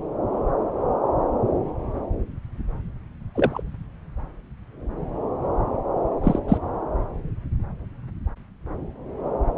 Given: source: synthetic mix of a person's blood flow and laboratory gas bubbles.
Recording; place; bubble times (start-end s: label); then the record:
Doppler ultrasound of blood flow; subclavian vein
3.35-3.61 s: bubbles
6.23-6.39 s: bubbles
6.48-6.58 s: bubbles
From the record:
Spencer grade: 1 (occasional bubble signal discernible with the cardiac motion signal, with majority of cardiac periods free of bubbles); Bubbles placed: anywhere in the cardiac cycle